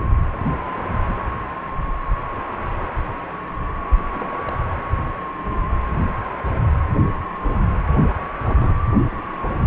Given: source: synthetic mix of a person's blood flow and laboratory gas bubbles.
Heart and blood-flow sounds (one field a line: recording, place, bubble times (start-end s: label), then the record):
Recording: Doppler ultrasound of blood flow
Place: precordium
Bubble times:
3.95-4.01 s: bubbles
4.10-4.59 s: bubbles
8.08-8.15 s: bubbles
8.19-8.28 s: bubbles
8.42-8.78 s: bubbles
From the record:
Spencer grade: 2 (many but less than half of the cardiac periods contain bubble signals, singularly or in groups)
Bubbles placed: anywhere in the cardiac cycle